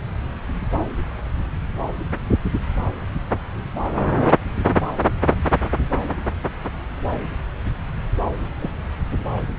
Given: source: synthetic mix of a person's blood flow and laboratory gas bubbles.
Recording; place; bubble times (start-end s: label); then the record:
Doppler ultrasound of blood flow; subclavian vein
8.58-8.71 s: bubbles
9.37-9.40 s: bubbles
From the record:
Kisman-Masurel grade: 121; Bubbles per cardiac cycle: 1 to 2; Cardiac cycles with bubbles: 10 to 50%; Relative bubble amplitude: barely perceptible (0.100 to 0.250); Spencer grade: 2 (many but less than half of the cardiac periods contain bubble signals, singularly or in groups); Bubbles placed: anywhere in the cardiac cycle